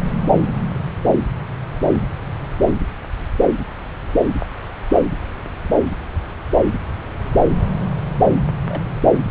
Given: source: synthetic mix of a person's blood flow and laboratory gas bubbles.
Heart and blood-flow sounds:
Doppler ultrasound of blood flow; subclavian vein
8.68-8.84 s: bubbles
9.12-9.21 s: bubbles
From the record:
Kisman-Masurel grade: 111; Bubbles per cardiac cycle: 1 to 2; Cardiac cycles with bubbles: 1 to 10%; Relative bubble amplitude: barely perceptible (0.100 to 0.250); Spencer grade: 1 (occasional bubble signal discernible with the cardiac motion signal, with majority of cardiac periods free of bubbles); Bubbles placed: anywhere in the cardiac cycle

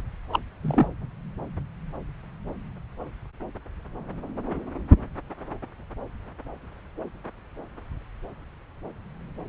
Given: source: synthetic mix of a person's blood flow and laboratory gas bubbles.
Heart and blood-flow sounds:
Doppler ultrasound of blood flow; subclavian vein
0.32-0.40 s: bubbles
0.63-0.87 s: bubbles
From the record:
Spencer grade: 1 (occasional bubble signal discernible with the cardiac motion signal, with majority of cardiac periods free of bubbles); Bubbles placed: anywhere in the cardiac cycle

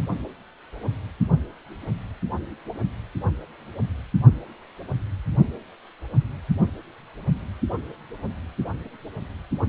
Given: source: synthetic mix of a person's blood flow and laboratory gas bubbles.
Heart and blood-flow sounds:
Doppler ultrasound of blood flow; precordium
no bubbles
From the record:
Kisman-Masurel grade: 000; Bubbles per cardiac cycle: 0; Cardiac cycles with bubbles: 0%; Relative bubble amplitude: no bubbles discernible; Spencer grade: 0 (complete lack of bubble signals)

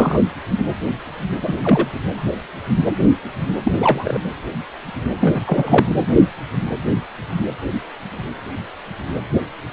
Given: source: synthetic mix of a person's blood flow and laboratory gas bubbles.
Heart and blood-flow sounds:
Doppler ultrasound of blood flow; precordium
0.00-0.20 s: bubbles
1.41-1.88 s: bubbles
3.63-3.72 s: bubbles
3.79-4.20 s: bubbles
5.20-5.42 s: bubbles
5.46-6.01 s: bubbles
From the record:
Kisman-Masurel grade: 223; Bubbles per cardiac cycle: several, 3 to 8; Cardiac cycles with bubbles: 10 to 50%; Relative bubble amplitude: loud (0.450 to 0.775); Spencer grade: 2 (many but less than half of the cardiac periods contain bubble signals, singularly or in groups); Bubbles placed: anywhere in the cardiac cycle

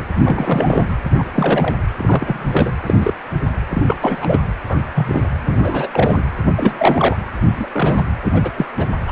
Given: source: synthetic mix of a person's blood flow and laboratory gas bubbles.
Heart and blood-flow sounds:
Doppler ultrasound of blood flow; precordium
0.24-0.84 s: bubbles
1.18-1.24 s: bubbles
1.31-1.74 s: bubbles
1.96-2.71 s: bubbles
2.86-2.94 s: bubbles
3.00-3.14 s: bubbles
3.70-4.39 s: bubbles
4.68-4.78 s: bubbles
4.95-5.24 s: bubbles
5.46-5.88 s: bubbles
5.92-6.23 s: bubbles
6.54-7.17 s: bubbles
7.56-7.67 s: bubbles
7.73-8.09 s: bubbles
8.24-8.66 s: bubbles
8.77-8.88 s: bubbles
9.08-9.12 s: bubbles
From the record:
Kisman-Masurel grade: 242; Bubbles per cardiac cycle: several, 3 to 8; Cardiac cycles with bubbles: 100%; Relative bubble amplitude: moderate (0.250 to 0.450); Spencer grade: 3 (all of the cardiac periods contain showers or single bubble signals, but not dominating or overriding the cardiac motion signals); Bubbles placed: anywhere in the cardiac cycle

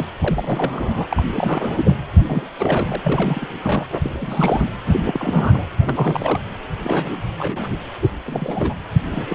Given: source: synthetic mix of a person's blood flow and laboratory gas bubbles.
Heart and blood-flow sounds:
Doppler ultrasound of blood flow; precordium
0.00-0.07 s: bubbles
0.21-1.23 s: bubbles
1.36-1.94 s: bubbles
2.19-2.48 s: bubbles
2.58-2.98 s: bubbles
3.03-3.54 s: bubbles
3.62-3.86 s: bubbles
3.91-3.99 s: bubbles
4.03-4.17 s: bubbles
4.21-4.71 s: bubbles
4.86-5.65 s: bubbles
5.84-6.40 s: bubbles
6.82-7.27 s: bubbles
7.38-7.77 s: bubbles
8.02-8.12 s: bubbles
8.25-8.74 s: bubbles
9.11-9.35 s: bubbles
From the record:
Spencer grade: 3 (all of the cardiac periods contain showers or single bubble signals, but not dominating or overriding the cardiac motion signals); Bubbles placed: anywhere in the cardiac cycle

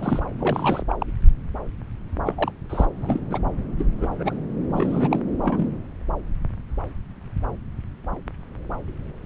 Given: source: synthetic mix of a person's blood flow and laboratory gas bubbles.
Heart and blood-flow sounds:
Doppler ultrasound of blood flow; subclavian vein
0.00-0.22 s: bubbles
0.39-0.82 s: bubbles
0.89-0.95 s: bubbles
1.00-1.06 s: bubbles
2.25-2.52 s: bubbles
2.69-2.85 s: bubbles
2.98-3.21 s: bubbles
3.31-3.39 s: bubbles
3.78-3.85 s: bubbles
3.98-4.39 s: bubbles
4.72-5.19 s: bubbles
5.44-5.69 s: bubbles
From the record:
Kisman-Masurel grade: 232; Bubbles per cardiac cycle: several, 3 to 8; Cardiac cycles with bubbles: 50 to 99%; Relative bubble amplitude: moderate (0.250 to 0.450); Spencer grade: 3 (all of the cardiac periods contain showers or single bubble signals, but not dominating or overriding the cardiac motion signals); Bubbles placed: anywhere in the cardiac cycle

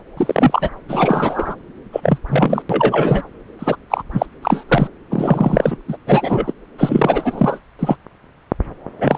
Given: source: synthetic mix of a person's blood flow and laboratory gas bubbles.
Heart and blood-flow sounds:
Doppler ultrasound of blood flow; subclavian vein
0.17-0.71 s: bubbles
0.89-1.56 s: bubbles
1.92-2.00 s: bubbles
2.03-2.18 s: bubbles
2.29-2.62 s: bubbles
2.69-3.22 s: bubbles
3.59-3.76 s: bubbles
3.90-4.03 s: bubbles
4.12-4.26 s: bubbles
4.42-4.63 s: bubbles
4.68-4.88 s: bubbles
5.09-5.76 s: bubbles
5.88-5.97 s: bubbles
6.07-6.53 s: bubbles
6.78-7.59 s: bubbles
7.79-7.96 s: bubbles
8.99-9.18 s: bubbles
From the record:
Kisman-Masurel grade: 243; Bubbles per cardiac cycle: several, 3 to 8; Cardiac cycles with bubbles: 100%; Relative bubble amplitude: loud (0.450 to 0.775); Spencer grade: 3 (all of the cardiac periods contain showers or single bubble signals, but not dominating or overriding the cardiac motion signals); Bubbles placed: anywhere in the cardiac cycle

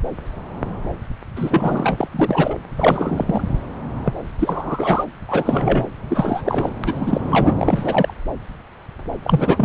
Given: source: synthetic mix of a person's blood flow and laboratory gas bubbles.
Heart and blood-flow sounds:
Doppler ultrasound of blood flow; subclavian vein
1.36-2.08 s: bubbles
2.11-2.55 s: bubbles
2.77-3.41 s: bubbles
4.05-4.13 s: bubbles
4.38-5.04 s: bubbles
5.28-5.88 s: bubbles
6.09-6.42 s: bubbles
6.45-6.69 s: bubbles
6.83-7.53 s: bubbles
7.58-8.14 s: bubbles
9.24-9.65 s: bubbles
From the record:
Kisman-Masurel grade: 332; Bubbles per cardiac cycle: rolling drumbeat, 9 or more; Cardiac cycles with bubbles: 50 to 99%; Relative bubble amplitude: moderate (0.250 to 0.450); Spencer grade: 3 (all of the cardiac periods contain showers or single bubble signals, but not dominating or overriding the cardiac motion signals); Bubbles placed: anywhere in the cardiac cycle

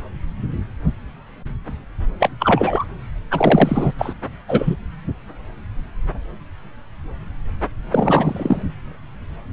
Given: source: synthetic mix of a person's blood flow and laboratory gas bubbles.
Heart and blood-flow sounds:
Doppler ultrasound of blood flow; subclavian vein
2.20-2.30 s: bubbles
2.39-2.85 s: bubbles
3.31-3.92 s: bubbles
3.99-4.13 s: bubbles
4.48-4.75 s: bubbles
7.92-8.62 s: bubbles
From the record:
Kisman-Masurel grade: 223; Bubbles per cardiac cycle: several, 3 to 8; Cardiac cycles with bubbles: 10 to 50%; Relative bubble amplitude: loud (0.450 to 0.775); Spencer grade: 2 (many but less than half of the cardiac periods contain bubble signals, singularly or in groups); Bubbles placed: anywhere in the cardiac cycle

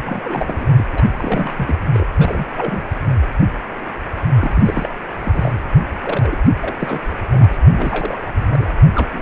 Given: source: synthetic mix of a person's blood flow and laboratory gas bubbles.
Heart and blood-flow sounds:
Doppler ultrasound of blood flow; precordium
0.00-0.20 s: bubbles
0.23-0.69 s: bubbles
0.78-0.85 s: bubbles
0.93-1.04 s: bubbles
1.17-1.75 s: bubbles
1.93-2.05 s: bubbles
2.16-2.47 s: bubbles
2.55-2.89 s: bubbles
4.40-4.90 s: bubbles
5.19-5.56 s: bubbles
6.00-6.36 s: bubbles
6.60-7.00 s: bubbles
7.03-7.16 s: bubbles
7.29-7.56 s: bubbles
7.74-8.32 s: bubbles
8.36-8.70 s: bubbles
8.95-9.08 s: bubbles
9.12-9.22 s: bubbles
From the record:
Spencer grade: 3 (all of the cardiac periods contain showers or single bubble signals, but not dominating or overriding the cardiac motion signals); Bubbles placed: anywhere in the cardiac cycle

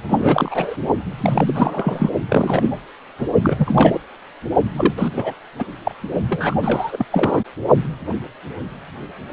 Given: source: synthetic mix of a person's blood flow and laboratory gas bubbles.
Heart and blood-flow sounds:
Doppler ultrasound of blood flow; precordium
0.07-0.77 s: bubbles
1.18-2.09 s: bubbles
2.28-2.71 s: bubbles
3.18-3.27 s: bubbles
3.42-4.00 s: bubbles
4.76-4.94 s: bubbles
4.98-5.08 s: bubbles
5.14-5.34 s: bubbles
5.58-5.65 s: bubbles
5.85-5.95 s: bubbles
6.28-6.54 s: bubbles
6.62-7.06 s: bubbles
7.12-7.41 s: bubbles
From the record:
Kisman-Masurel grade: 333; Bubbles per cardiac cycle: rolling drumbeat, 9 or more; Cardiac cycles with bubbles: 50 to 99%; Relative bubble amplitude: loud (0.450 to 0.775); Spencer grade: 3 (all of the cardiac periods contain showers or single bubble signals, but not dominating or overriding the cardiac motion signals); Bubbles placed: only in the low amplitude regions of the cardiac cycle

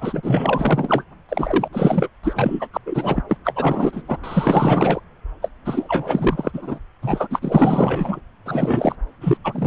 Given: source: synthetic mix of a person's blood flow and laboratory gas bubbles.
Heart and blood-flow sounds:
Doppler ultrasound of blood flow; subclavian vein
0.00-1.03 s: bubbles
1.28-1.68 s: bubbles
1.72-2.08 s: bubbles
2.23-2.68 s: bubbles
2.73-2.78 s: bubbles
2.85-3.22 s: bubbles
3.28-3.37 s: bubbles
3.44-4.03 s: bubbles
4.07-4.17 s: bubbles
4.23-5.00 s: bubbles
5.42-5.50 s: bubbles
5.65-6.79 s: bubbles
7.02-7.27 s: bubbles
7.30-8.21 s: bubbles
8.46-8.96 s: bubbles
9.21-9.37 s: bubbles
9.44-9.67 s: bubbles
From the record:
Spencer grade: 4 (maximum detectable bubble signal sounding continuously throughout systole and diastole of every cardiac period, and overriding the amplitude of the normal cardiac signals); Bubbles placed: anywhere in the cardiac cycle

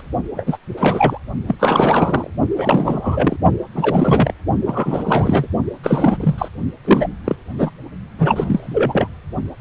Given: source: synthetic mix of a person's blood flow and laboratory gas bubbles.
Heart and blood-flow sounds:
Doppler ultrasound of blood flow; precordium
0.34-0.57 s: bubbles
0.77-1.19 s: bubbles
1.47-1.55 s: bubbles
1.59-2.30 s: bubbles
2.56-3.36 s: bubbles
3.74-4.32 s: bubbles
4.65-5.47 s: bubbles
5.83-6.17 s: bubbles
6.20-6.36 s: bubbles
6.38-6.48 s: bubbles
6.85-7.08 s: bubbles
7.24-7.36 s: bubbles
7.57-7.71 s: bubbles
8.18-9.08 s: bubbles
From the record:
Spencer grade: 3 (all of the cardiac periods contain showers or single bubble signals, but not dominating or overriding the cardiac motion signals); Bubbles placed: only in the low amplitude regions of the cardiac cycle

